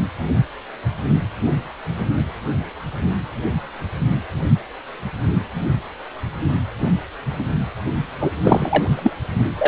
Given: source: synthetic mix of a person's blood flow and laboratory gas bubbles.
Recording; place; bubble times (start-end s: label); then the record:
Doppler ultrasound of blood flow; precordium
8.20-8.31 s: bubbles
8.44-9.16 s: bubbles
9.57-9.68 s: bubbles
From the record:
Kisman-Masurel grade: 213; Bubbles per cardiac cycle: several, 3 to 8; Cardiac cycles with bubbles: 1 to 10%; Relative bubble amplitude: loud (0.450 to 0.775); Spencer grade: 1 (occasional bubble signal discernible with the cardiac motion signal, with majority of cardiac periods free of bubbles); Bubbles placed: anywhere in the cardiac cycle